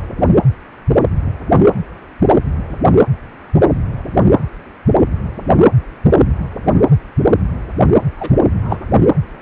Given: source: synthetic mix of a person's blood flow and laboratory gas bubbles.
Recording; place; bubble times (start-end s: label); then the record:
Doppler ultrasound of blood flow; precordium
2.69-2.76 s: bubbles
8.17-8.36 s: bubbles
8.62-8.87 s: bubbles
From the record:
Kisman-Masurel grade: 123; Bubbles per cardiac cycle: 1 to 2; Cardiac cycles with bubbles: 10 to 50%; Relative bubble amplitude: loud (0.450 to 0.775); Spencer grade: 2 (many but less than half of the cardiac periods contain bubble signals, singularly or in groups); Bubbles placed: anywhere in the cardiac cycle